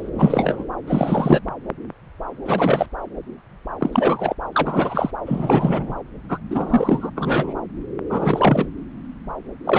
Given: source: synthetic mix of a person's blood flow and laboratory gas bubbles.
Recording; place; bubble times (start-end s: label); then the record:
Doppler ultrasound of blood flow; subclavian vein
0.00-0.09 s: bubbles
0.14-0.65 s: bubbles
0.88-1.40 s: bubbles
2.45-2.86 s: bubbles
3.80-4.34 s: bubbles
4.52-5.11 s: bubbles
5.25-5.93 s: bubbles
6.28-6.38 s: bubbles
6.50-7.10 s: bubbles
7.15-7.54 s: bubbles
8.10-8.67 s: bubbles
9.64-9.79 s: bubbles
From the record:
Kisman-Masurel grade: 333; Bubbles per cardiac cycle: rolling drumbeat, 9 or more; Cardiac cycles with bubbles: 50 to 99%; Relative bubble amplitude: loud (0.450 to 0.775); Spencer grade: 3 (all of the cardiac periods contain showers or single bubble signals, but not dominating or overriding the cardiac motion signals); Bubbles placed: anywhere in the cardiac cycle